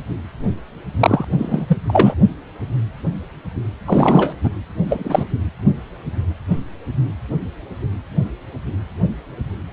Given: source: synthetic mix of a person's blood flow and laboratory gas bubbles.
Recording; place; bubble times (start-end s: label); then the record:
Doppler ultrasound of blood flow; precordium
0.99-1.24 s: bubbles
1.39-1.77 s: bubbles
1.87-2.15 s: bubbles
3.86-4.32 s: bubbles
4.43-4.50 s: bubbles
4.85-5.27 s: bubbles
From the record:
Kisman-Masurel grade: 223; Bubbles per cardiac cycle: several, 3 to 8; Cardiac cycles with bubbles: 10 to 50%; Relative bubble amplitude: loud (0.450 to 0.775); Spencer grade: 2 (many but less than half of the cardiac periods contain bubble signals, singularly or in groups); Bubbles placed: anywhere in the cardiac cycle